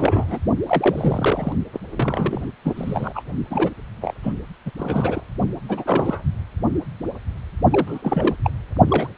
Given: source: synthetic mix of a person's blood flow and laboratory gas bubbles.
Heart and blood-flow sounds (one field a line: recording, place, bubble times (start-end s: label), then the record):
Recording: Doppler ultrasound of blood flow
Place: precordium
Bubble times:
0.00-0.38 s: bubbles
0.66-1.52 s: bubbles
1.73-1.80 s: bubbles
1.92-2.51 s: bubbles
2.64-2.74 s: bubbles
2.76-3.22 s: bubbles
3.50-3.70 s: bubbles
4.01-4.14 s: bubbles
4.23-4.33 s: bubbles
4.66-4.71 s: bubbles
4.76-5.24 s: bubbles
5.69-6.23 s: bubbles
7.71-8.36 s: bubbles
8.44-8.50 s: bubbles
8.88-9.12 s: bubbles
From the record:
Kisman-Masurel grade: 332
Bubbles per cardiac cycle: rolling drumbeat, 9 or more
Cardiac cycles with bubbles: 50 to 99%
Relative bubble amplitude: moderate (0.250 to 0.450)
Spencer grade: 3 (all of the cardiac periods contain showers or single bubble signals, but not dominating or overriding the cardiac motion signals)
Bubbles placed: only in the low amplitude regions of the cardiac cycle